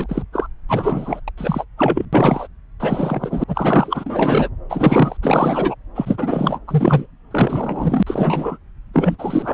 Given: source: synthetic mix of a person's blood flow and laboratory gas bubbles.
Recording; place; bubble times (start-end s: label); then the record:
Doppler ultrasound of blood flow; subclavian vein
0.00-0.23 s: bubbles
0.32-0.47 s: bubbles
0.69-1.21 s: bubbles
1.27-1.30 s: bubbles
1.38-1.65 s: bubbles
1.77-2.06 s: bubbles
2.12-2.48 s: bubbles
2.79-3.44 s: bubbles
3.48-4.50 s: bubbles
4.70-5.17 s: bubbles
5.22-5.75 s: bubbles
5.95-6.58 s: bubbles
6.67-7.07 s: bubbles
7.30-8.03 s: bubbles
8.06-8.57 s: bubbles
8.93-9.54 s: bubbles
From the record:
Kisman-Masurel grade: 343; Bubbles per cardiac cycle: rolling drumbeat, 9 or more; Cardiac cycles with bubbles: 100%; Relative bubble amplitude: loud (0.450 to 0.775); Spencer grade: 3 (all of the cardiac periods contain showers or single bubble signals, but not dominating or overriding the cardiac motion signals); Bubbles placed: anywhere in the cardiac cycle